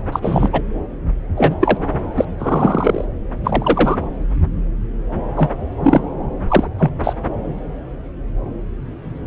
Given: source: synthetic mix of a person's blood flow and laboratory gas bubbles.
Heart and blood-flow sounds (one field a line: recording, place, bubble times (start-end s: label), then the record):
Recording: Doppler ultrasound of blood flow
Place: subclavian vein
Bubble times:
0.12-0.49 s: bubbles
0.53-0.61 s: bubbles
1.36-1.78 s: bubbles
2.16-2.25 s: bubbles
2.38-3.04 s: bubbles
3.44-3.96 s: bubbles
5.36-5.50 s: bubbles
5.83-6.00 s: bubbles
6.48-6.67 s: bubbles
6.79-6.92 s: bubbles
7.04-7.13 s: bubbles
From the record:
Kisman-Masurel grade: 233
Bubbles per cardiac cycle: several, 3 to 8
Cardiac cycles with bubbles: 50 to 99%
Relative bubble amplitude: loud (0.450 to 0.775)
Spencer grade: 3 (all of the cardiac periods contain showers or single bubble signals, but not dominating or overriding the cardiac motion signals)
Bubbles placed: anywhere in the cardiac cycle